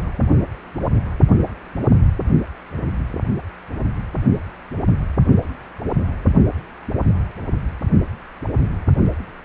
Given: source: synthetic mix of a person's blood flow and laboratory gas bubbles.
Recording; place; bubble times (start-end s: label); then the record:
Doppler ultrasound of blood flow; precordium
no bubbles
From the record:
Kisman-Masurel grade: 000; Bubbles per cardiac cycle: 0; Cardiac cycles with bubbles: 0%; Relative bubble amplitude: no bubbles discernible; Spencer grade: 0 (complete lack of bubble signals)